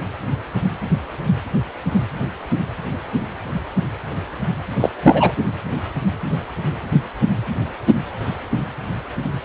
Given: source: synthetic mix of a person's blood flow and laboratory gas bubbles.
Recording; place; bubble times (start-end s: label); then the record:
Doppler ultrasound of blood flow; precordium
4.80-4.89 s: bubbles
5.02-5.33 s: bubbles
From the record:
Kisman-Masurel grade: 213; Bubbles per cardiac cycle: several, 3 to 8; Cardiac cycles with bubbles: 1 to 10%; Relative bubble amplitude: loud (0.450 to 0.775); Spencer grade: 1 (occasional bubble signal discernible with the cardiac motion signal, with majority of cardiac periods free of bubbles); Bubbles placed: anywhere in the cardiac cycle